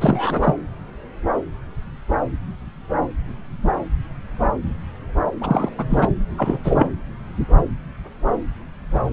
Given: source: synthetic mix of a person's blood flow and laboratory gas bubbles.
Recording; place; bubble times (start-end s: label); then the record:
Doppler ultrasound of blood flow; subclavian vein
0.01-0.54 s: bubbles
5.41-5.69 s: bubbles
5.78-5.86 s: bubbles
5.90-6.11 s: bubbles
6.37-6.59 s: bubbles
6.63-6.90 s: bubbles
From the record:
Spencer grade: 2 (many but less than half of the cardiac periods contain bubble signals, singularly or in groups); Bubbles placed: anywhere in the cardiac cycle